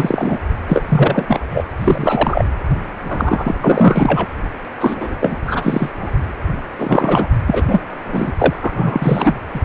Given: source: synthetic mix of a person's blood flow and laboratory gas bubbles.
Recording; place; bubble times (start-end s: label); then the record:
Doppler ultrasound of blood flow; precordium
0.00-0.39 s: bubbles
0.67-0.82 s: bubbles
0.89-1.40 s: bubbles
1.49-1.65 s: bubbles
1.71-1.73 s: bubbles
1.80-2.46 s: bubbles
3.01-3.55 s: bubbles
3.62-4.27 s: bubbles
4.81-5.15 s: bubbles
5.21-5.36 s: bubbles
5.47-5.90 s: bubbles
6.00-6.21 s: bubbles
6.79-7.29 s: bubbles
7.46-7.63 s: bubbles
7.67-7.83 s: bubbles
8.04-8.33 s: bubbles
8.38-8.54 s: bubbles
8.61-9.36 s: bubbles
9.54-9.60 s: bubbles
From the record:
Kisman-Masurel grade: 343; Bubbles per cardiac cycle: rolling drumbeat, 9 or more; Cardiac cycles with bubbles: 100%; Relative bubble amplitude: loud (0.450 to 0.775); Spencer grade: 3 (all of the cardiac periods contain showers or single bubble signals, but not dominating or overriding the cardiac motion signals); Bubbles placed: anywhere in the cardiac cycle